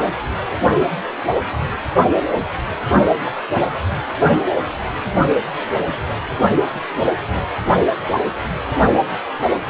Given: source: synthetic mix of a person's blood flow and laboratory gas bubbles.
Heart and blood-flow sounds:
Doppler ultrasound of blood flow; precordium
3.25-3.32 s: bubbles
3.55-3.64 s: bubbles
From the record:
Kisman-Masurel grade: 121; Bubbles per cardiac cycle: 1 to 2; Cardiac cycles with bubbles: 10 to 50%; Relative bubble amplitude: barely perceptible (0.100 to 0.250); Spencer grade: 2 (many but less than half of the cardiac periods contain bubble signals, singularly or in groups); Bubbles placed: anywhere in the cardiac cycle

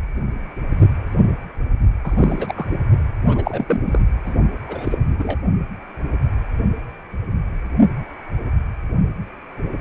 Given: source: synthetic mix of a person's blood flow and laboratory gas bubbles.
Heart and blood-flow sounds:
Doppler ultrasound of blood flow; precordium
2.03-2.66 s: bubbles
3.28-3.65 s: bubbles
3.67-3.82 s: bubbles
3.85-4.00 s: bubbles
4.25-4.34 s: bubbles
4.67-4.98 s: bubbles
5.08-5.38 s: bubbles
From the record:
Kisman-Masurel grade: 222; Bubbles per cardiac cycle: several, 3 to 8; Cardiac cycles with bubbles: 10 to 50%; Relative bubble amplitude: moderate (0.250 to 0.450); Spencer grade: 2 (many but less than half of the cardiac periods contain bubble signals, singularly or in groups); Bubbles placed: only in the low amplitude regions of the cardiac cycle

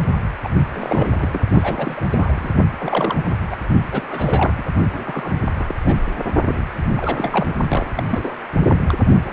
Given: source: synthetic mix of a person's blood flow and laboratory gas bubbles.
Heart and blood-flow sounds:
Doppler ultrasound of blood flow; precordium
0.43-0.49 s: bubbles
0.72-1.40 s: bubbles
1.49-2.02 s: bubbles
2.10-2.52 s: bubbles
2.79-3.37 s: bubbles
3.50-3.56 s: bubbles
3.91-4.54 s: bubbles
4.57-4.63 s: bubbles
4.93-5.32 s: bubbles
5.59-5.74 s: bubbles
5.84-5.97 s: bubbles
6.46-6.65 s: bubbles
6.97-7.54 s: bubbles
7.68-7.86 s: bubbles
7.95-8.04 s: bubbles
8.08-8.37 s: bubbles
8.64-8.79 s: bubbles
8.88-8.94 s: bubbles
9.25-9.33 s: bubbles
From the record:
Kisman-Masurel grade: 242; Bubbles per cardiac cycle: several, 3 to 8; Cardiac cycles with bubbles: 100%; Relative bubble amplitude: moderate (0.250 to 0.450); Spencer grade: 3 (all of the cardiac periods contain showers or single bubble signals, but not dominating or overriding the cardiac motion signals); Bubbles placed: only in the low amplitude regions of the cardiac cycle

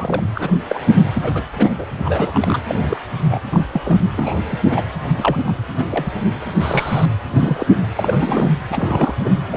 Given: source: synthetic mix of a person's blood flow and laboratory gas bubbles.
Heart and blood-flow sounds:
Doppler ultrasound of blood flow; precordium
0.00-0.22 s: bubbles
0.35-0.63 s: bubbles
0.68-0.79 s: bubbles
0.94-1.04 s: bubbles
1.14-1.47 s: bubbles
1.53-1.85 s: bubbles
1.97-2.60 s: bubbles
2.69-2.98 s: bubbles
3.25-3.40 s: bubbles
3.51-3.60 s: bubbles
3.73-3.81 s: bubbles
3.83-3.97 s: bubbles
4.17-4.83 s: bubbles
5.17-5.37 s: bubbles
5.45-5.56 s: bubbles
5.75-6.13 s: bubbles
6.61-7.06 s: bubbles
7.30-7.66 s: bubbles
7.96-8.51 s: bubbles
8.68-9.14 s: bubbles
9.24-9.30 s: bubbles
9.51-9.57 s: bubbles
From the record:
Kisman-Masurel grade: 242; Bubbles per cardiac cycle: several, 3 to 8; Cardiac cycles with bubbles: 100%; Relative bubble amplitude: moderate (0.250 to 0.450); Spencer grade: 3 (all of the cardiac periods contain showers or single bubble signals, but not dominating or overriding the cardiac motion signals); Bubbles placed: anywhere in the cardiac cycle

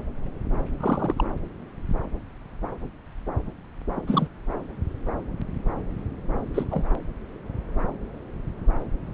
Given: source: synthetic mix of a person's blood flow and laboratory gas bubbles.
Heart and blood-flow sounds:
Doppler ultrasound of blood flow; subclavian vein
0.79-1.24 s: bubbles
3.96-4.01 s: bubbles
4.07-4.28 s: bubbles
6.54-6.64 s: bubbles
6.71-6.84 s: bubbles
From the record:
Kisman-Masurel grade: 221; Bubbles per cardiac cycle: several, 3 to 8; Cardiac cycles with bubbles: 10 to 50%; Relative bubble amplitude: barely perceptible (0.100 to 0.250); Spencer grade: 2 (many but less than half of the cardiac periods contain bubble signals, singularly or in groups); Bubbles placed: anywhere in the cardiac cycle

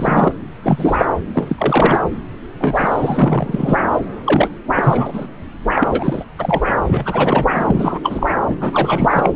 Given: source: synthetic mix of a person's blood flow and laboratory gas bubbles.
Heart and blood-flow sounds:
Doppler ultrasound of blood flow; subclavian vein
0.00-0.32 s: bubbles
0.62-1.05 s: bubbles
1.33-2.01 s: bubbles
2.60-3.78 s: bubbles
3.94-4.00 s: bubbles
4.25-4.49 s: bubbles
4.76-5.27 s: bubbles
5.75-6.25 s: bubbles
6.39-6.63 s: bubbles
6.87-7.46 s: bubbles
7.54-7.99 s: bubbles
8.04-8.27 s: bubbles
8.43-8.57 s: bubbles
8.60-9.33 s: bubbles
From the record:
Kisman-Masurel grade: 343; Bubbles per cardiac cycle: rolling drumbeat, 9 or more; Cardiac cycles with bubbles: 100%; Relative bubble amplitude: loud (0.450 to 0.775); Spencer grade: 3 (all of the cardiac periods contain showers or single bubble signals, but not dominating or overriding the cardiac motion signals); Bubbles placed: anywhere in the cardiac cycle

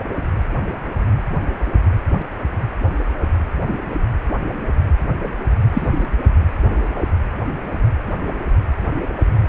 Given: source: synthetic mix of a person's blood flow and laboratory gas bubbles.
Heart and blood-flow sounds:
Doppler ultrasound of blood flow; precordium
5.73-6.05 s: bubbles
From the record:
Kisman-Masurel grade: 113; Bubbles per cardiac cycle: 1 to 2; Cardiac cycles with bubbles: 1 to 10%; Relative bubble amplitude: loud (0.450 to 0.775); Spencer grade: 1 (occasional bubble signal discernible with the cardiac motion signal, with majority of cardiac periods free of bubbles); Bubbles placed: anywhere in the cardiac cycle

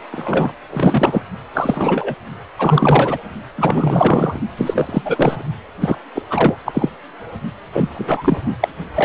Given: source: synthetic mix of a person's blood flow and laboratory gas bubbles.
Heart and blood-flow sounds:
Doppler ultrasound of blood flow; precordium
0.11-0.52 s: bubbles
0.70-1.23 s: bubbles
1.54-2.15 s: bubbles
2.58-3.19 s: bubbles
3.56-4.40 s: bubbles
4.57-5.02 s: bubbles
5.04-5.43 s: bubbles
5.80-5.96 s: bubbles
6.15-6.22 s: bubbles
6.29-6.57 s: bubbles
6.65-6.90 s: bubbles
7.72-7.89 s: bubbles
7.93-8.40 s: bubbles
8.60-8.68 s: bubbles
8.94-9.05 s: bubbles
From the record:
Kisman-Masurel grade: 343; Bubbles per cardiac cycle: rolling drumbeat, 9 or more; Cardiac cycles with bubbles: 100%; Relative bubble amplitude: loud (0.450 to 0.775); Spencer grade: 3 (all of the cardiac periods contain showers or single bubble signals, but not dominating or overriding the cardiac motion signals); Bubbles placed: only in the low amplitude regions of the cardiac cycle

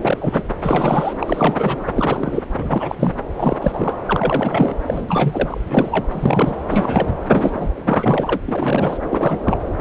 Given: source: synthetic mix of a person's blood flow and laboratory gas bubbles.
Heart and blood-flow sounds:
Doppler ultrasound of blood flow; subclavian vein
0.01-0.17 s: bubbles
0.20-0.44 s: bubbles
0.62-1.14 s: bubbles
1.19-1.83 s: bubbles
1.96-2.43 s: bubbles
2.58-2.96 s: bubbles
2.98-3.12 s: bubbles
3.36-3.57 s: bubbles
3.61-4.00 s: bubbles
4.07-4.75 s: bubbles
4.86-5.60 s: bubbles
5.67-6.06 s: bubbles
6.11-6.63 s: bubbles
6.70-7.14 s: bubbles
7.28-7.69 s: bubbles
7.83-8.40 s: bubbles
8.46-8.98 s: bubbles
9.10-9.38 s: bubbles
9.45-9.58 s: bubbles
From the record:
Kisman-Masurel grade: 342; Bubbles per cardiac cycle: rolling drumbeat, 9 or more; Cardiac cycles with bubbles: 100%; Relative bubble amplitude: moderate (0.250 to 0.450); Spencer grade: 3 (all of the cardiac periods contain showers or single bubble signals, but not dominating or overriding the cardiac motion signals); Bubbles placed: anywhere in the cardiac cycle

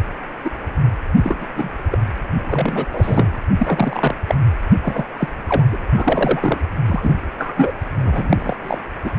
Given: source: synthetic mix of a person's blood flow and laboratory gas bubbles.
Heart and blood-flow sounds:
Doppler ultrasound of blood flow; precordium
0.44-0.51 s: bubbles
1.23-1.45 s: bubbles
1.56-1.69 s: bubbles
1.91-1.99 s: bubbles
2.47-2.86 s: bubbles
2.93-3.38 s: bubbles
3.58-4.14 s: bubbles
4.27-4.35 s: bubbles
4.81-5.04 s: bubbles
5.17-5.29 s: bubbles
5.48-5.63 s: bubbles
5.69-6.58 s: bubbles
6.88-7.15 s: bubbles
7.38-7.72 s: bubbles
8.03-8.56 s: bubbles
8.63-8.79 s: bubbles
9.04-9.11 s: bubbles
From the record:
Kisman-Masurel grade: 243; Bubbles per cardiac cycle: several, 3 to 8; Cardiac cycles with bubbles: 100%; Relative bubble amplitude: loud (0.450 to 0.775); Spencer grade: 3 (all of the cardiac periods contain showers or single bubble signals, but not dominating or overriding the cardiac motion signals); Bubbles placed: anywhere in the cardiac cycle

